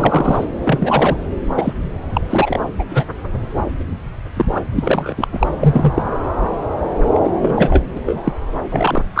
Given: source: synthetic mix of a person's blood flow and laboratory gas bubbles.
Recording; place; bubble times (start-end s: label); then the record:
Doppler ultrasound of blood flow; subclavian vein
0.00-0.45 s: bubbles
0.64-1.17 s: bubbles
1.56-1.73 s: bubbles
2.13-2.21 s: bubbles
2.29-2.60 s: bubbles
2.79-2.84 s: bubbles
2.89-3.05 s: bubbles
4.36-4.46 s: bubbles
4.51-4.61 s: bubbles
4.75-5.28 s: bubbles
5.33-5.47 s: bubbles
5.60-5.92 s: bubbles
5.96-6.04 s: bubbles
7.13-7.20 s: bubbles
7.23-7.29 s: bubbles
7.41-7.82 s: bubbles
7.95-8.00 s: bubbles
8.06-8.22 s: bubbles
8.25-8.33 s: bubbles
8.71-9.02 s: bubbles
9.14-9.20 s: bubbles
From the record:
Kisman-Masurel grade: 233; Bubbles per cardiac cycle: several, 3 to 8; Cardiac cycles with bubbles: 50 to 99%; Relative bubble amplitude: loud (0.450 to 0.775); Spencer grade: 3 (all of the cardiac periods contain showers or single bubble signals, but not dominating or overriding the cardiac motion signals); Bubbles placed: anywhere in the cardiac cycle